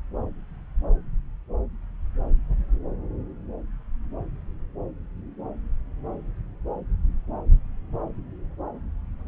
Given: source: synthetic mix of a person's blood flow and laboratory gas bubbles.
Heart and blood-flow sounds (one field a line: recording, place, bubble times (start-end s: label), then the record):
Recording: Doppler ultrasound of blood flow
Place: subclavian vein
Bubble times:
no bubbles
From the record:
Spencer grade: 0 (complete lack of bubble signals)